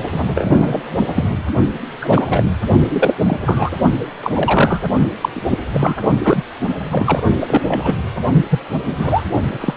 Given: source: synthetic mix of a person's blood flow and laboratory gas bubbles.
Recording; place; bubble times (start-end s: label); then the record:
Doppler ultrasound of blood flow; precordium
0.11-0.24 s: bubbles
0.35-0.82 s: bubbles
1.15-1.24 s: bubbles
2.01-2.44 s: bubbles
2.88-3.14 s: bubbles
3.25-3.40 s: bubbles
3.46-3.70 s: bubbles
3.96-4.08 s: bubbles
4.23-4.33 s: bubbles
4.35-4.80 s: bubbles
5.21-5.29 s: bubbles
5.35-5.41 s: bubbles
5.48-5.59 s: bubbles
5.73-5.96 s: bubbles
6.22-6.42 s: bubbles
6.90-7.23 s: bubbles
7.33-7.62 s: bubbles
7.67-7.98 s: bubbles
8.32-8.46 s: bubbles
8.50-8.60 s: bubbles
8.82-9.23 s: bubbles
9.39-9.57 s: bubbles
9.61-9.74 s: bubbles
From the record:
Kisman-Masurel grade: 243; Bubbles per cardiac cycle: several, 3 to 8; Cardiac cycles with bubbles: 100%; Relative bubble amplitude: loud (0.450 to 0.775); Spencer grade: 3 (all of the cardiac periods contain showers or single bubble signals, but not dominating or overriding the cardiac motion signals); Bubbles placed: only in the low amplitude regions of the cardiac cycle